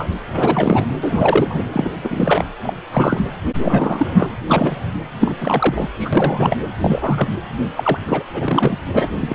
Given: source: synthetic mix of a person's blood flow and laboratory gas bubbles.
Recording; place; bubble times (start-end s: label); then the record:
Doppler ultrasound of blood flow; precordium
0.00-0.09 s: bubbles
0.28-0.86 s: bubbles
1.00-1.64 s: bubbles
1.73-1.91 s: bubbles
2.02-2.45 s: bubbles
2.63-2.75 s: bubbles
2.92-3.21 s: bubbles
3.58-4.28 s: bubbles
4.50-4.81 s: bubbles
5.20-5.34 s: bubbles
5.41-5.90 s: bubbles
6.00-6.10 s: bubbles
6.12-6.57 s: bubbles
6.81-7.27 s: bubbles
7.77-7.99 s: bubbles
8.08-8.24 s: bubbles
8.34-8.78 s: bubbles
8.92-9.09 s: bubbles
9.21-9.35 s: bubbles
From the record:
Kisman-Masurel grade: 343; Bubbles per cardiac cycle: rolling drumbeat, 9 or more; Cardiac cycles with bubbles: 100%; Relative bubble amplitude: loud (0.450 to 0.775); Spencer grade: 3 (all of the cardiac periods contain showers or single bubble signals, but not dominating or overriding the cardiac motion signals); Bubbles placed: anywhere in the cardiac cycle